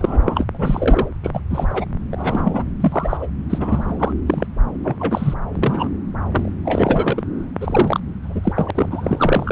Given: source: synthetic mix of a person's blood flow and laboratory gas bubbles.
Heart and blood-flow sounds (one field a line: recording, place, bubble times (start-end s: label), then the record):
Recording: Doppler ultrasound of blood flow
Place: subclavian vein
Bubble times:
0.00-0.45 s: bubbles
0.53-1.08 s: bubbles
1.24-1.41 s: bubbles
1.51-1.85 s: bubbles
2.11-2.64 s: bubbles
2.80-3.17 s: bubbles
3.19-3.27 s: bubbles
3.49-4.12 s: bubbles
4.26-4.46 s: bubbles
4.83-4.96 s: bubbles
4.99-5.34 s: bubbles
5.55-5.88 s: bubbles
6.30-6.51 s: bubbles
6.65-7.22 s: bubbles
7.60-8.00 s: bubbles
8.24-8.53 s: bubbles
8.56-8.71 s: bubbles
8.75-9.52 s: bubbles
From the record:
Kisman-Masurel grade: 243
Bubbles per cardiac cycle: several, 3 to 8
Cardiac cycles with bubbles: 100%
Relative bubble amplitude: loud (0.450 to 0.775)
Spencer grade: 3 (all of the cardiac periods contain showers or single bubble signals, but not dominating or overriding the cardiac motion signals)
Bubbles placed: anywhere in the cardiac cycle